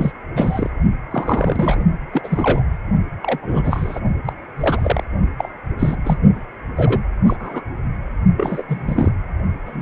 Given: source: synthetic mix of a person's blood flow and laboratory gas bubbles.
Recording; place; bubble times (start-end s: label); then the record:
Doppler ultrasound of blood flow; precordium
0.00-0.12 s: bubbles
0.35-0.70 s: bubbles
1.10-1.83 s: bubbles
2.13-2.63 s: bubbles
3.22-3.39 s: bubbles
3.42-4.00 s: bubbles
4.25-4.33 s: bubbles
4.56-5.03 s: bubbles
5.38-5.49 s: bubbles
5.79-5.96 s: bubbles
6.03-6.18 s: bubbles
6.76-7.00 s: bubbles
7.26-7.36 s: bubbles
7.39-7.61 s: bubbles
8.36-8.63 s: bubbles
8.68-9.12 s: bubbles
9.66-9.82 s: bubbles
From the record:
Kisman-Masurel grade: 242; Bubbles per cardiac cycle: several, 3 to 8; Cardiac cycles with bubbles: 100%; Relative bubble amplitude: moderate (0.250 to 0.450); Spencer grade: 3 (all of the cardiac periods contain showers or single bubble signals, but not dominating or overriding the cardiac motion signals); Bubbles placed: only in the low amplitude regions of the cardiac cycle